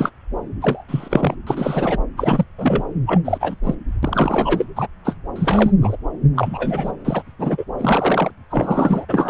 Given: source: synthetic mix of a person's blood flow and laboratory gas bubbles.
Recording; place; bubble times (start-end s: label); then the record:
Doppler ultrasound of blood flow; subclavian vein
0.00-0.11 s: bubbles
0.61-0.83 s: bubbles
0.88-1.35 s: bubbles
1.47-1.98 s: bubbles
2.17-2.44 s: bubbles
2.58-2.83 s: bubbles
3.06-3.21 s: bubbles
3.25-3.55 s: bubbles
3.63-3.75 s: bubbles
4.03-4.65 s: bubbles
4.75-4.88 s: bubbles
5.04-5.16 s: bubbles
5.36-5.74 s: bubbles
5.82-5.96 s: bubbles
6.35-6.92 s: bubbles
7.04-7.23 s: bubbles
7.38-7.64 s: bubbles
7.79-8.31 s: bubbles
8.50-9.05 s: bubbles
9.08-9.30 s: bubbles
From the record:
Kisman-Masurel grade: 243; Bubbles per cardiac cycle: several, 3 to 8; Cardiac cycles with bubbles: 100%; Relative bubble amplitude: loud (0.450 to 0.775); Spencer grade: 3 (all of the cardiac periods contain showers or single bubble signals, but not dominating or overriding the cardiac motion signals); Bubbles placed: anywhere in the cardiac cycle